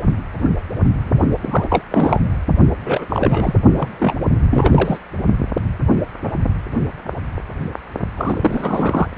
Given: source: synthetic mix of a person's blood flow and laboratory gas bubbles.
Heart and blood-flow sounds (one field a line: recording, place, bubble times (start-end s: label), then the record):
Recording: Doppler ultrasound of blood flow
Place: precordium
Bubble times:
1.42-1.65 s: bubbles
1.69-1.85 s: bubbles
1.91-2.20 s: bubbles
2.84-3.06 s: bubbles
3.09-3.54 s: bubbles
3.76-4.15 s: bubbles
4.51-4.99 s: bubbles
8.17-9.08 s: bubbles
From the record:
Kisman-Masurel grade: 333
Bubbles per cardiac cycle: rolling drumbeat, 9 or more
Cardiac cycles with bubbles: 50 to 99%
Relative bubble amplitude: loud (0.450 to 0.775)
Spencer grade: 3 (all of the cardiac periods contain showers or single bubble signals, but not dominating or overriding the cardiac motion signals)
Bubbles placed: only in the low amplitude regions of the cardiac cycle